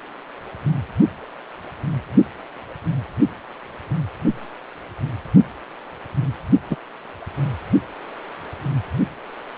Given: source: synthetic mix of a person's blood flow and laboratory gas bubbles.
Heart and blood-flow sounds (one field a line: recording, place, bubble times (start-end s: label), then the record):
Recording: Doppler ultrasound of blood flow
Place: precordium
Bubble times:
6.70-6.76 s: bubbles
From the record:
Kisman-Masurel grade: 113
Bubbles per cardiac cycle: 1 to 2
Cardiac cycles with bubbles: 1 to 10%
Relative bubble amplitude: loud (0.450 to 0.775)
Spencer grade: 1 (occasional bubble signal discernible with the cardiac motion signal, with majority of cardiac periods free of bubbles)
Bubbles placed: only in the low amplitude regions of the cardiac cycle